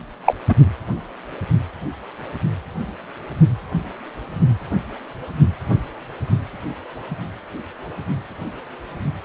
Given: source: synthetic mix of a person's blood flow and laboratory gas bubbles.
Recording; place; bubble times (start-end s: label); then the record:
Doppler ultrasound of blood flow; precordium
0.25-0.35 s: bubbles
0.49-0.54 s: bubbles
From the record:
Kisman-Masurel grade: 213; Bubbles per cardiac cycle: several, 3 to 8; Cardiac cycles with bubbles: 1 to 10%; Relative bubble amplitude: loud (0.450 to 0.775); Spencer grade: 1 (occasional bubble signal discernible with the cardiac motion signal, with majority of cardiac periods free of bubbles); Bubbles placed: only in the low amplitude regions of the cardiac cycle